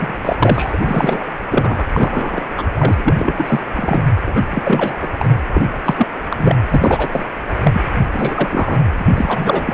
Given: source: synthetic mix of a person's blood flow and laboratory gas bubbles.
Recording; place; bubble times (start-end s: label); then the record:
Doppler ultrasound of blood flow; precordium
0.00-0.18 s: bubbles
0.23-0.36 s: bubbles
0.40-0.78 s: bubbles
0.82-1.26 s: bubbles
1.50-1.85 s: bubbles
1.94-2.44 s: bubbles
2.57-2.66 s: bubbles
2.75-3.60 s: bubbles
3.75-4.03 s: bubbles
4.26-4.97 s: bubbles
5.01-5.07 s: bubbles
5.17-5.37 s: bubbles
5.53-5.72 s: bubbles
5.84-6.06 s: bubbles
6.30-6.55 s: bubbles
6.70-7.08 s: bubbles
7.12-7.25 s: bubbles
7.62-7.82 s: bubbles
8.12-8.85 s: bubbles
8.98-9.74 s: bubbles
From the record:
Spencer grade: 3 (all of the cardiac periods contain showers or single bubble signals, but not dominating or overriding the cardiac motion signals); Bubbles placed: anywhere in the cardiac cycle